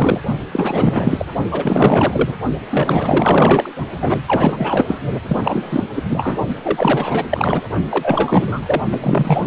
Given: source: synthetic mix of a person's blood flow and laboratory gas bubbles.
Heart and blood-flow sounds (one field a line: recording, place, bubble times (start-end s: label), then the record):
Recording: Doppler ultrasound of blood flow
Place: precordium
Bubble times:
0.00-0.21 s: bubbles
0.51-1.25 s: bubbles
1.51-2.35 s: bubbles
2.71-3.69 s: bubbles
4.01-4.20 s: bubbles
4.26-5.00 s: bubbles
5.27-5.83 s: bubbles
5.95-6.04 s: bubbles
6.09-6.38 s: bubbles
6.48-6.54 s: bubbles
6.63-7.23 s: bubbles
7.30-7.65 s: bubbles
7.90-8.82 s: bubbles
8.91-9.47 s: bubbles
From the record:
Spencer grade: 4 (maximum detectable bubble signal sounding continuously throughout systole and diastole of every cardiac period, and overriding the amplitude of the normal cardiac signals)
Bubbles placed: only in the low amplitude regions of the cardiac cycle